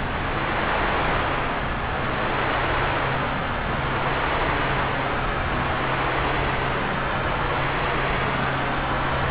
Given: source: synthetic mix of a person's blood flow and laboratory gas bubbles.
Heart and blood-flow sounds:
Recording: Doppler ultrasound of blood flow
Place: subclavian vein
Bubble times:
no bubbles
From the record:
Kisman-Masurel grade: 000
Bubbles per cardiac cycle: 0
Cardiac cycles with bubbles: 0%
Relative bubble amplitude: no bubbles discernible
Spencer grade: 0 (complete lack of bubble signals)

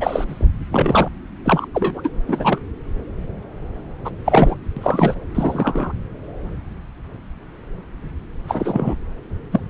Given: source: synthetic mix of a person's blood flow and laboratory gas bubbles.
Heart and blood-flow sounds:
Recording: Doppler ultrasound of blood flow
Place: subclavian vein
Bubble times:
0.00-0.24 s: bubbles
0.27-0.45 s: bubbles
0.71-1.08 s: bubbles
1.44-1.67 s: bubbles
1.73-2.11 s: bubbles
2.28-2.60 s: bubbles
4.04-4.10 s: bubbles
4.25-4.55 s: bubbles
4.76-5.14 s: bubbles
5.34-5.92 s: bubbles
8.47-8.94 s: bubbles
9.52-9.61 s: bubbles
From the record:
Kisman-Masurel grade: 233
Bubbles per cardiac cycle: several, 3 to 8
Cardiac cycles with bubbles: 50 to 99%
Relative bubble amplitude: loud (0.450 to 0.775)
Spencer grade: 3 (all of the cardiac periods contain showers or single bubble signals, but not dominating or overriding the cardiac motion signals)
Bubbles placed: anywhere in the cardiac cycle

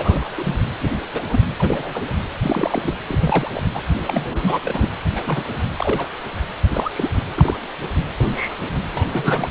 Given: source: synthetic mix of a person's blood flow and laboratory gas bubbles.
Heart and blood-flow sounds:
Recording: Doppler ultrasound of blood flow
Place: precordium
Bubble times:
0.00-0.55 s: bubbles
0.80-0.99 s: bubbles
1.13-1.24 s: bubbles
1.31-1.39 s: bubbles
1.58-2.04 s: bubbles
2.42-2.97 s: bubbles
3.07-3.51 s: bubbles
3.54-3.63 s: bubbles
3.74-3.80 s: bubbles
4.07-4.90 s: bubbles
5.16-5.44 s: bubbles
5.75-6.10 s: bubbles
6.64-7.09 s: bubbles
7.35-7.57 s: bubbles
8.20-8.57 s: bubbles
8.91-9.48 s: bubbles
From the record:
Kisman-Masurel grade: 232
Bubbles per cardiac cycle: several, 3 to 8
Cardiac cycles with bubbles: 50 to 99%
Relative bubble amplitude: moderate (0.250 to 0.450)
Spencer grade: 3 (all of the cardiac periods contain showers or single bubble signals, but not dominating or overriding the cardiac motion signals)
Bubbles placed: anywhere in the cardiac cycle

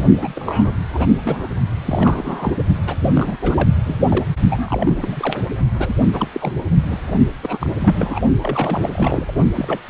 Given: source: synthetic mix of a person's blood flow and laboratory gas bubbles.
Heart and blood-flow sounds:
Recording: Doppler ultrasound of blood flow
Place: precordium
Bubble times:
0.20-0.74 s: bubbles
0.93-1.06 s: bubbles
1.21-1.48 s: bubbles
1.85-2.52 s: bubbles
2.86-2.96 s: bubbles
3.00-3.37 s: bubbles
3.42-3.69 s: bubbles
3.84-3.99 s: bubbles
4.10-4.25 s: bubbles
4.51-5.41 s: bubbles
5.78-5.94 s: bubbles
6.13-6.29 s: bubbles
6.34-6.53 s: bubbles
6.89-6.97 s: bubbles
7.43-7.70 s: bubbles
7.80-8.20 s: bubbles
8.42-9.34 s: bubbles
9.54-9.80 s: bubbles
From the record:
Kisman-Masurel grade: 342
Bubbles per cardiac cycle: rolling drumbeat, 9 or more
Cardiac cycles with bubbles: 100%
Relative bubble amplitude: moderate (0.250 to 0.450)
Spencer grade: 3 (all of the cardiac periods contain showers or single bubble signals, but not dominating or overriding the cardiac motion signals)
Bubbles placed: only in the low amplitude regions of the cardiac cycle

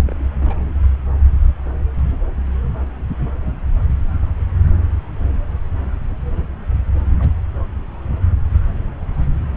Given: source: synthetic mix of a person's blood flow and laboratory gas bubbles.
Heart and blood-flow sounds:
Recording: Doppler ultrasound of blood flow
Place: subclavian vein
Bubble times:
0.07-0.27 s: bubbles
0.40-0.74 s: bubbles
7.19-7.29 s: bubbles
From the record:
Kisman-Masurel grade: 121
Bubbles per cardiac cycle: 1 to 2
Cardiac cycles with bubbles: 10 to 50%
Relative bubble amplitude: barely perceptible (0.100 to 0.250)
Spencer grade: 2 (many but less than half of the cardiac periods contain bubble signals, singularly or in groups)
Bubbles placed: anywhere in the cardiac cycle

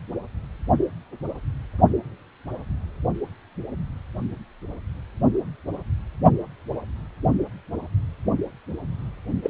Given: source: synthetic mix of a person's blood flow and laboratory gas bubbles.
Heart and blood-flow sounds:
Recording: Doppler ultrasound of blood flow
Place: precordium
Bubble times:
9.43-9.50 s: bubbles
From the record:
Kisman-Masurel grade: 213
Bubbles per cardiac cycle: several, 3 to 8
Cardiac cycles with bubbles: 1 to 10%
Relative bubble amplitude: loud (0.450 to 0.775)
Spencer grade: 1 (occasional bubble signal discernible with the cardiac motion signal, with majority of cardiac periods free of bubbles)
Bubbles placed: only in the low amplitude regions of the cardiac cycle

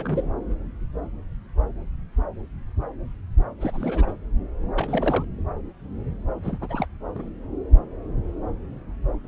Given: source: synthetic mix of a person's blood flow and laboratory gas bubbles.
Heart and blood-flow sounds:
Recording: Doppler ultrasound of blood flow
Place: subclavian vein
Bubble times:
0.00-0.24 s: bubbles
3.59-4.13 s: bubbles
4.75-5.25 s: bubbles
6.42-6.58 s: bubbles
6.60-6.86 s: bubbles
7.14-7.29 s: bubbles
From the record:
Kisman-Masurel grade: 221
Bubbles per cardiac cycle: several, 3 to 8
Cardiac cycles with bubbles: 10 to 50%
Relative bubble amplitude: barely perceptible (0.100 to 0.250)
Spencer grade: 2 (many but less than half of the cardiac periods contain bubble signals, singularly or in groups)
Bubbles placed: anywhere in the cardiac cycle

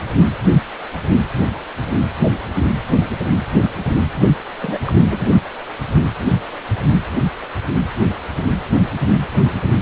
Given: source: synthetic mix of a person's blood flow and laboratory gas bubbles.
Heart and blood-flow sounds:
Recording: Doppler ultrasound of blood flow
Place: precordium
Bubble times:
4.60-4.79 s: bubbles
4.86-4.95 s: bubbles
5.05-5.27 s: bubbles
From the record:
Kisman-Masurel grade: 211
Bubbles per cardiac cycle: several, 3 to 8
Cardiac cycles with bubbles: 1 to 10%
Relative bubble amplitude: barely perceptible (0.100 to 0.250)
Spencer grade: 1 (occasional bubble signal discernible with the cardiac motion signal, with majority of cardiac periods free of bubbles)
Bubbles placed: only in the low amplitude regions of the cardiac cycle

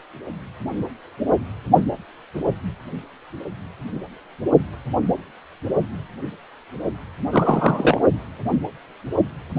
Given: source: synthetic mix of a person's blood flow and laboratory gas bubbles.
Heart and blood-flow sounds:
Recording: Doppler ultrasound of blood flow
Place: precordium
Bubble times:
7.31-8.00 s: bubbles
From the record:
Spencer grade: 2 (many but less than half of the cardiac periods contain bubble signals, singularly or in groups)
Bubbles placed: only in the low amplitude regions of the cardiac cycle

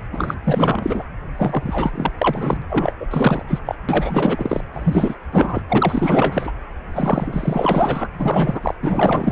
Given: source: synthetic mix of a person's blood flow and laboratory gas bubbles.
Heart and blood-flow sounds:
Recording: Doppler ultrasound of blood flow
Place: precordium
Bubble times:
0.12-0.35 s: bubbles
0.43-1.04 s: bubbles
1.35-2.12 s: bubbles
2.17-2.62 s: bubbles
2.69-2.94 s: bubbles
2.99-3.06 s: bubbles
3.10-3.45 s: bubbles
3.47-3.59 s: bubbles
3.66-3.75 s: bubbles
3.88-4.61 s: bubbles
4.72-5.16 s: bubbles
5.32-5.62 s: bubbles
5.68-6.52 s: bubbles
6.93-8.08 s: bubbles
8.20-8.75 s: bubbles
8.82-9.32 s: bubbles
From the record:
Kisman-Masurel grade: 444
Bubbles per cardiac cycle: continuous sound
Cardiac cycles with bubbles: 100%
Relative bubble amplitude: maximal (0.775 to 0.999)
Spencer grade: 4 (maximum detectable bubble signal sounding continuously throughout systole and diastole of every cardiac period, and overriding the amplitude of the normal cardiac signals)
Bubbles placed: anywhere in the cardiac cycle

